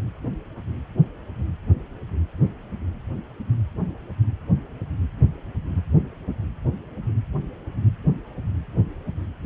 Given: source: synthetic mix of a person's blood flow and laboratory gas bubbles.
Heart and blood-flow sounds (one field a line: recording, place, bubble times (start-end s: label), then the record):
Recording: Doppler ultrasound of blood flow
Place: precordium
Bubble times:
no bubbles
From the record:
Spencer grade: 0 (complete lack of bubble signals)